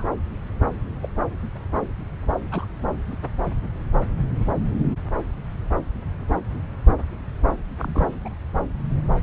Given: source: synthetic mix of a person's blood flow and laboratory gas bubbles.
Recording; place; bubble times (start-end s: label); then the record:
Doppler ultrasound of blood flow; subclavian vein
0.00-0.05 s: bubbles
1.03-1.08 s: bubbles
2.51-2.65 s: bubbles
3.11-3.15 s: bubbles
7.77-8.13 s: bubbles
8.25-8.29 s: bubbles
From the record:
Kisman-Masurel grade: 121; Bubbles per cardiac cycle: 1 to 2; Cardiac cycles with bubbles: 10 to 50%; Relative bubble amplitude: barely perceptible (0.100 to 0.250); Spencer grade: 2 (many but less than half of the cardiac periods contain bubble signals, singularly or in groups); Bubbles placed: anywhere in the cardiac cycle